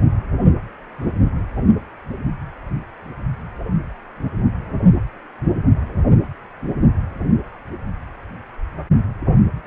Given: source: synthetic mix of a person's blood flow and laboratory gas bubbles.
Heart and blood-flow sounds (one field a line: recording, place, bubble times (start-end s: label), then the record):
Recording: Doppler ultrasound of blood flow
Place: precordium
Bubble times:
9.65-9.67 s: bubbles
From the record:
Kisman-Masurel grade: 113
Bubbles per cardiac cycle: 1 to 2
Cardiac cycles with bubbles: 1 to 10%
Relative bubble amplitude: loud (0.450 to 0.775)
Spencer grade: 1 (occasional bubble signal discernible with the cardiac motion signal, with majority of cardiac periods free of bubbles)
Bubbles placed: only in the low amplitude regions of the cardiac cycle